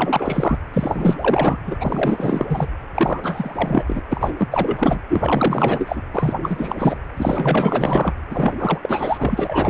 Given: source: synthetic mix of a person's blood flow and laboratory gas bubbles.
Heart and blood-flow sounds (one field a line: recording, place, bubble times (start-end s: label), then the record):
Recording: Doppler ultrasound of blood flow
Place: precordium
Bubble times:
0.00-0.58 s: bubbles
0.73-1.16 s: bubbles
1.21-1.57 s: bubbles
1.66-1.75 s: bubbles
1.80-2.46 s: bubbles
2.49-2.68 s: bubbles
2.95-3.85 s: bubbles
3.87-4.00 s: bubbles
4.09-4.30 s: bubbles
4.37-4.48 s: bubbles
4.51-5.00 s: bubbles
5.09-6.02 s: bubbles
6.14-6.98 s: bubbles
7.17-8.13 s: bubbles
8.30-8.79 s: bubbles
8.82-9.70 s: bubbles
From the record:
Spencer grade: 4 (maximum detectable bubble signal sounding continuously throughout systole and diastole of every cardiac period, and overriding the amplitude of the normal cardiac signals)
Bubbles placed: anywhere in the cardiac cycle